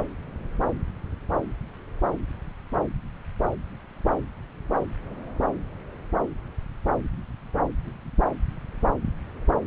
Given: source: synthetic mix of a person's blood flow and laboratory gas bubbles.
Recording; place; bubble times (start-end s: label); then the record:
Doppler ultrasound of blood flow; subclavian vein
0.00-0.02 s: bubbles
From the record:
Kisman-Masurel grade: 111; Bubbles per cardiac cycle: 1 to 2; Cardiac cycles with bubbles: 1 to 10%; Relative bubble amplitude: barely perceptible (0.100 to 0.250); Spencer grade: 1 (occasional bubble signal discernible with the cardiac motion signal, with majority of cardiac periods free of bubbles); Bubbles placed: anywhere in the cardiac cycle